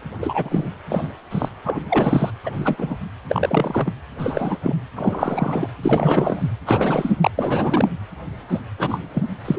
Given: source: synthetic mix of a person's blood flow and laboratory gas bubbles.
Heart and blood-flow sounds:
Doppler ultrasound of blood flow; precordium
0.22-0.74 s: bubbles
0.89-1.12 s: bubbles
1.31-1.49 s: bubbles
1.64-1.81 s: bubbles
1.89-2.31 s: bubbles
2.44-2.94 s: bubbles
3.28-3.93 s: bubbles
4.18-4.58 s: bubbles
4.62-4.75 s: bubbles
4.96-5.70 s: bubbles
5.83-6.48 s: bubbles
6.66-7.13 s: bubbles
7.21-7.31 s: bubbles
7.38-7.91 s: bubbles
8.48-8.61 s: bubbles
8.78-9.01 s: bubbles
9.13-9.23 s: bubbles
9.45-9.59 s: bubbles
From the record:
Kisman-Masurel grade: 243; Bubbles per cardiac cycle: several, 3 to 8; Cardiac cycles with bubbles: 100%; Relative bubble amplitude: loud (0.450 to 0.775); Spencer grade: 3 (all of the cardiac periods contain showers or single bubble signals, but not dominating or overriding the cardiac motion signals); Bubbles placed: anywhere in the cardiac cycle

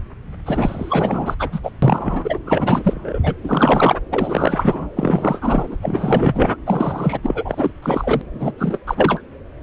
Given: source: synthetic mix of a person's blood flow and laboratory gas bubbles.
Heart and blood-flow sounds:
Doppler ultrasound of blood flow; subclavian vein
0.46-1.34 s: bubbles
1.39-1.49 s: bubbles
1.51-1.60 s: bubbles
1.63-1.71 s: bubbles
1.82-2.39 s: bubbles
2.45-3.21 s: bubbles
3.23-3.34 s: bubbles
3.44-4.00 s: bubbles
4.12-4.90 s: bubbles
4.96-5.77 s: bubbles
5.82-6.57 s: bubbles
6.66-7.20 s: bubbles
7.23-7.71 s: bubbles
7.82-8.21 s: bubbles
8.33-8.52 s: bubbles
8.58-8.79 s: bubbles
8.86-9.21 s: bubbles
From the record:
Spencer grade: 4 (maximum detectable bubble signal sounding continuously throughout systole and diastole of every cardiac period, and overriding the amplitude of the normal cardiac signals); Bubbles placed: anywhere in the cardiac cycle

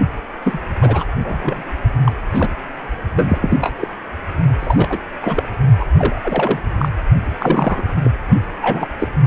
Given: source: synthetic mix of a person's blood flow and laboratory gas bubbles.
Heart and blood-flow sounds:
Doppler ultrasound of blood flow; precordium
0.45-0.59 s: bubbles
0.81-1.06 s: bubbles
1.23-1.65 s: bubbles
2.04-2.12 s: bubbles
2.30-2.48 s: bubbles
3.16-3.38 s: bubbles
3.42-3.87 s: bubbles
4.59-4.99 s: bubbles
5.22-5.49 s: bubbles
5.79-5.86 s: bubbles
5.97-6.60 s: bubbles
6.79-6.89 s: bubbles
7.39-8.01 s: bubbles
8.04-8.11 s: bubbles
8.62-8.88 s: bubbles
8.99-9.08 s: bubbles
From the record:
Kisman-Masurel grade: 232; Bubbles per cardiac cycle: several, 3 to 8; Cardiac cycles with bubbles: 50 to 99%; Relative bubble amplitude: moderate (0.250 to 0.450); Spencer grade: 3 (all of the cardiac periods contain showers or single bubble signals, but not dominating or overriding the cardiac motion signals); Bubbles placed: only in the low amplitude regions of the cardiac cycle

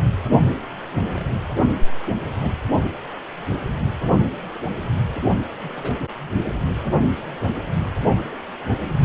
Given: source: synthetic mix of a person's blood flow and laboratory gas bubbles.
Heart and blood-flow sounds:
Doppler ultrasound of blood flow; precordium
1.14-1.25 s: bubbles
1.28-1.40 s: bubbles
2.40-2.52 s: bubbles
3.50-3.56 s: bubbles
5.61-6.03 s: bubbles
7.84-7.92 s: bubbles
From the record:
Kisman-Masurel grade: 121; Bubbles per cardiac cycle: 1 to 2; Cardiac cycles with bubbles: 10 to 50%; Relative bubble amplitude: barely perceptible (0.100 to 0.250); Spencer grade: 2 (many but less than half of the cardiac periods contain bubble signals, singularly or in groups); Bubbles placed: only in the low amplitude regions of the cardiac cycle

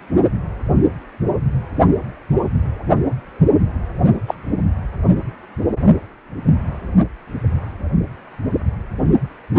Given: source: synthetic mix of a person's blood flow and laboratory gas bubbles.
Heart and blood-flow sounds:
Doppler ultrasound of blood flow; precordium
4.27-4.34 s: bubbles
From the record:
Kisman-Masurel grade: 113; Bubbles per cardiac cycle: 1 to 2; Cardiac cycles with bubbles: 1 to 10%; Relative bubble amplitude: loud (0.450 to 0.775); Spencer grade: 1 (occasional bubble signal discernible with the cardiac motion signal, with majority of cardiac periods free of bubbles); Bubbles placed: only in the low amplitude regions of the cardiac cycle

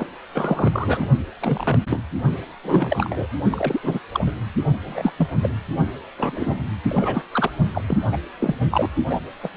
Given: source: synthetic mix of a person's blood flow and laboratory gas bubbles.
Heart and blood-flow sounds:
Doppler ultrasound of blood flow; precordium
0.00-0.06 s: bubbles
0.34-1.06 s: bubbles
1.39-1.79 s: bubbles
1.86-2.00 s: bubbles
2.63-3.27 s: bubbles
3.50-3.79 s: bubbles
3.82-3.99 s: bubbles
4.13-4.32 s: bubbles
4.86-5.12 s: bubbles
5.18-5.28 s: bubbles
5.43-5.54 s: bubbles
6.17-6.58 s: bubbles
6.83-7.24 s: bubbles
7.32-7.50 s: bubbles
7.74-7.82 s: bubbles
7.87-7.97 s: bubbles
8.12-8.17 s: bubbles
8.39-8.55 s: bubbles
8.71-8.89 s: bubbles
9.09-9.21 s: bubbles
9.43-9.49 s: bubbles
From the record:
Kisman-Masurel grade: 242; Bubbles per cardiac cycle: several, 3 to 8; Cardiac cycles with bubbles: 100%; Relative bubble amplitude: moderate (0.250 to 0.450); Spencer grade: 3 (all of the cardiac periods contain showers or single bubble signals, but not dominating or overriding the cardiac motion signals); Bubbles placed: only in the low amplitude regions of the cardiac cycle

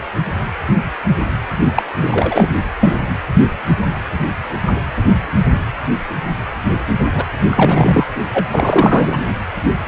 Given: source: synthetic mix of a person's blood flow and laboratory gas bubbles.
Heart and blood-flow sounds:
Doppler ultrasound of blood flow; precordium
1.74-1.82 s: bubbles
2.01-2.54 s: bubbles
2.80-3.00 s: bubbles
7.14-7.24 s: bubbles
7.51-8.07 s: bubbles
8.33-9.26 s: bubbles
From the record:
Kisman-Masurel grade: 223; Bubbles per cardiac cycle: several, 3 to 8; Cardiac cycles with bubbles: 10 to 50%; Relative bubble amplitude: loud (0.450 to 0.775); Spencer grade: 2 (many but less than half of the cardiac periods contain bubble signals, singularly or in groups); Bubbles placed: anywhere in the cardiac cycle

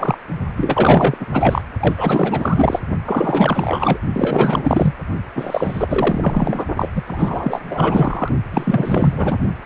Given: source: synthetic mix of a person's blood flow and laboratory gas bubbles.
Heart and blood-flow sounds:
Doppler ultrasound of blood flow; precordium
0.00-0.18 s: bubbles
0.56-1.26 s: bubbles
1.32-1.62 s: bubbles
1.79-2.79 s: bubbles
3.04-3.98 s: bubbles
4.13-4.95 s: bubbles
5.35-6.65 s: bubbles
6.77-6.91 s: bubbles
6.95-7.03 s: bubbles
7.06-8.29 s: bubbles
8.51-9.39 s: bubbles
9.62-9.66 s: bubbles
From the record:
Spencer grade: 4 (maximum detectable bubble signal sounding continuously throughout systole and diastole of every cardiac period, and overriding the amplitude of the normal cardiac signals); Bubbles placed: only in the low amplitude regions of the cardiac cycle

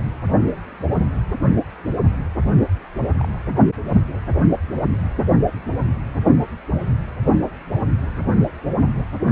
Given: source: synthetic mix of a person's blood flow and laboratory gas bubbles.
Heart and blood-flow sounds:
Doppler ultrasound of blood flow; precordium
3.12-3.40 s: bubbles
From the record:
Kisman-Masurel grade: 111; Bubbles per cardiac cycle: 1 to 2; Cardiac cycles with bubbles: 1 to 10%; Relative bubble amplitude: barely perceptible (0.100 to 0.250); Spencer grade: 1 (occasional bubble signal discernible with the cardiac motion signal, with majority of cardiac periods free of bubbles); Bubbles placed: only in the low amplitude regions of the cardiac cycle

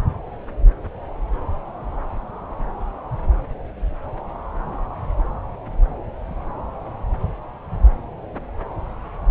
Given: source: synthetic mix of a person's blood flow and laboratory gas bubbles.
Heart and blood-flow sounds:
Doppler ultrasound of blood flow; subclavian vein
no bubbles
From the record:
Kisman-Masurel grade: 000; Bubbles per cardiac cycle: 0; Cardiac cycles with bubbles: 0%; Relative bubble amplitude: no bubbles discernible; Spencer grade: 0 (complete lack of bubble signals)

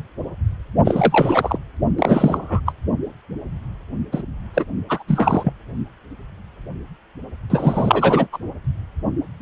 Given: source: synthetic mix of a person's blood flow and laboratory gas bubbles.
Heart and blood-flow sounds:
Doppler ultrasound of blood flow; precordium
0.85-1.58 s: bubbles
1.99-2.61 s: bubbles
2.66-2.72 s: bubbles
4.12-4.23 s: bubbles
4.54-4.65 s: bubbles
4.88-5.03 s: bubbles
5.08-5.53 s: bubbles
7.50-8.27 s: bubbles
8.32-8.38 s: bubbles
From the record:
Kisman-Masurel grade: 333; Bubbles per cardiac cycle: rolling drumbeat, 9 or more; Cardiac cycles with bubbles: 50 to 99%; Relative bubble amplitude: loud (0.450 to 0.775); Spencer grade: 3 (all of the cardiac periods contain showers or single bubble signals, but not dominating or overriding the cardiac motion signals); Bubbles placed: only in the low amplitude regions of the cardiac cycle

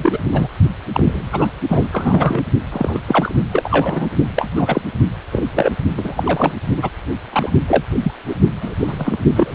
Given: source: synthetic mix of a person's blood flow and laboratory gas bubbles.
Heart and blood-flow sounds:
Doppler ultrasound of blood flow; precordium
0.00-0.19 s: bubbles
0.31-0.47 s: bubbles
0.94-1.27 s: bubbles
1.31-1.50 s: bubbles
1.68-1.87 s: bubbles
1.92-2.42 s: bubbles
2.72-3.00 s: bubbles
3.07-3.34 s: bubbles
3.52-4.15 s: bubbles
4.36-4.50 s: bubbles
4.56-4.81 s: bubbles
5.31-5.44 s: bubbles
5.54-5.72 s: bubbles
5.97-6.52 s: bubbles
6.76-6.89 s: bubbles
7.32-7.50 s: bubbles
7.67-7.83 s: bubbles
8.03-8.12 s: bubbles
8.27-8.36 s: bubbles
8.61-9.18 s: bubbles
9.36-9.55 s: bubbles
From the record:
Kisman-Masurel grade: 233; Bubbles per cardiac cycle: several, 3 to 8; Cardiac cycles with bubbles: 50 to 99%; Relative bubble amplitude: loud (0.450 to 0.775); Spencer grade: 3 (all of the cardiac periods contain showers or single bubble signals, but not dominating or overriding the cardiac motion signals); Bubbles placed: only in the low amplitude regions of the cardiac cycle

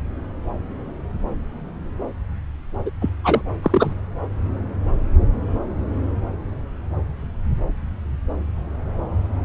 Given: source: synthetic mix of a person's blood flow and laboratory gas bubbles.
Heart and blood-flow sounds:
Doppler ultrasound of blood flow; subclavian vein
2.86-2.90 s: bubbles
3.01-3.09 s: bubbles
3.24-3.42 s: bubbles
3.62-3.92 s: bubbles
From the record:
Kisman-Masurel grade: 213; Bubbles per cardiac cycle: several, 3 to 8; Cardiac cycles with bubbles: 1 to 10%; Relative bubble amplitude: loud (0.450 to 0.775); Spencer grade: 1 (occasional bubble signal discernible with the cardiac motion signal, with majority of cardiac periods free of bubbles); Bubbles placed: anywhere in the cardiac cycle

